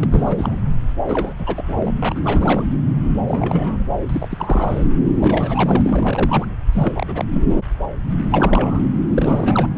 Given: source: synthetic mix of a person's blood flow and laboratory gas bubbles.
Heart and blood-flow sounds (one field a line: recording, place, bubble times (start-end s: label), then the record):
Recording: Doppler ultrasound of blood flow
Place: subclavian vein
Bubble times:
0.00-0.05 s: bubbles
0.10-0.60 s: bubbles
1.07-1.33 s: bubbles
1.39-1.94 s: bubbles
2.01-2.19 s: bubbles
2.24-2.64 s: bubbles
3.28-3.85 s: bubbles
4.09-4.88 s: bubbles
5.19-6.47 s: bubbles
6.73-7.25 s: bubbles
7.33-7.41 s: bubbles
8.30-8.83 s: bubbles
9.07-9.70 s: bubbles
From the record:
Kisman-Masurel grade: 332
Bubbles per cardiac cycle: rolling drumbeat, 9 or more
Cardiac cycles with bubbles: 50 to 99%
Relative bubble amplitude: moderate (0.250 to 0.450)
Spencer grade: 3 (all of the cardiac periods contain showers or single bubble signals, but not dominating or overriding the cardiac motion signals)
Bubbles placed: anywhere in the cardiac cycle